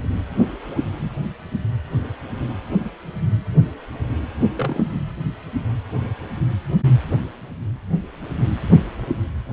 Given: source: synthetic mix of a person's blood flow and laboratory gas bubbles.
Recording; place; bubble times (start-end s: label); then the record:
Doppler ultrasound of blood flow; precordium
4.55-4.88 s: bubbles
4.92-5.00 s: bubbles
From the record:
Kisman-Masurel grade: 212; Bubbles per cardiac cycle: several, 3 to 8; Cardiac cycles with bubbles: 1 to 10%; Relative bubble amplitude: moderate (0.250 to 0.450); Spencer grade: 1 (occasional bubble signal discernible with the cardiac motion signal, with majority of cardiac periods free of bubbles); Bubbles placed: anywhere in the cardiac cycle